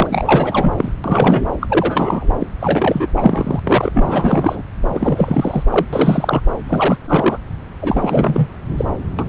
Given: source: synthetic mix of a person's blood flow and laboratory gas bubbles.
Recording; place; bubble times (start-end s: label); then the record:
Doppler ultrasound of blood flow; subclavian vein
0.00-0.73 s: bubbles
0.77-0.91 s: bubbles
1.04-1.47 s: bubbles
1.60-2.33 s: bubbles
2.40-2.47 s: bubbles
2.61-3.06 s: bubbles
3.16-3.60 s: bubbles
3.63-3.92 s: bubbles
3.95-4.62 s: bubbles
4.88-5.63 s: bubbles
5.71-5.87 s: bubbles
5.92-6.42 s: bubbles
6.69-6.98 s: bubbles
7.04-7.38 s: bubbles
7.81-8.47 s: bubbles
8.76-8.85 s: bubbles
9.18-9.23 s: bubbles
From the record:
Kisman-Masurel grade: 343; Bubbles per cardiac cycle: rolling drumbeat, 9 or more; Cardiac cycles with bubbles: 100%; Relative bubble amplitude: loud (0.450 to 0.775); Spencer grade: 3 (all of the cardiac periods contain showers or single bubble signals, but not dominating or overriding the cardiac motion signals); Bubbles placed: anywhere in the cardiac cycle